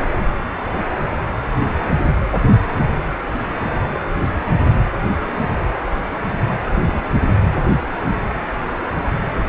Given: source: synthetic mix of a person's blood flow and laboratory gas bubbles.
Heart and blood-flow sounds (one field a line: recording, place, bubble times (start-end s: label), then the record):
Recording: Doppler ultrasound of blood flow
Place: precordium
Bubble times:
0.00-0.11 s: bubbles
3.93-4.00 s: bubbles
6.66-7.05 s: bubbles
8.31-8.41 s: bubbles
From the record:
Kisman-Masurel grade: 121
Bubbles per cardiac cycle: 1 to 2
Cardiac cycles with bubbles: 10 to 50%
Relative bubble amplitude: barely perceptible (0.100 to 0.250)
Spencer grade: 2 (many but less than half of the cardiac periods contain bubble signals, singularly or in groups)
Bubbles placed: anywhere in the cardiac cycle